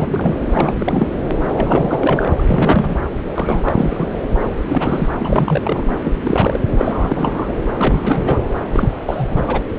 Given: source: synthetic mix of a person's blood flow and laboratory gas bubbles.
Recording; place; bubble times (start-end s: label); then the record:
Doppler ultrasound of blood flow; subclavian vein
0.00-0.35 s: bubbles
0.51-1.07 s: bubbles
1.54-2.30 s: bubbles
2.37-2.96 s: bubbles
3.34-4.08 s: bubbles
4.67-5.08 s: bubbles
5.19-5.87 s: bubbles
6.03-6.13 s: bubbles
6.19-6.61 s: bubbles
6.79-7.54 s: bubbles
7.78-8.39 s: bubbles
8.71-8.88 s: bubbles
9.06-9.27 s: bubbles
9.30-9.61 s: bubbles
From the record:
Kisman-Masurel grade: 342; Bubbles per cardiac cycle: rolling drumbeat, 9 or more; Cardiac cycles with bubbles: 100%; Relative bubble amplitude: moderate (0.250 to 0.450); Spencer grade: 3 (all of the cardiac periods contain showers or single bubble signals, but not dominating or overriding the cardiac motion signals); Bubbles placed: anywhere in the cardiac cycle